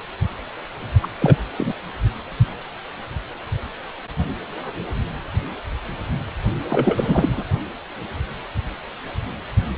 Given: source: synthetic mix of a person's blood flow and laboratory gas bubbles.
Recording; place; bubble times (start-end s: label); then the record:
Doppler ultrasound of blood flow; precordium
1.02-1.07 s: bubbles
1.19-1.36 s: bubbles
1.57-1.72 s: bubbles
6.70-7.44 s: bubbles
From the record:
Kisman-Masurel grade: 222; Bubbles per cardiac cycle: several, 3 to 8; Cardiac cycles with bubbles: 10 to 50%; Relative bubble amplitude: moderate (0.250 to 0.450); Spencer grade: 2 (many but less than half of the cardiac periods contain bubble signals, singularly or in groups); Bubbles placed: anywhere in the cardiac cycle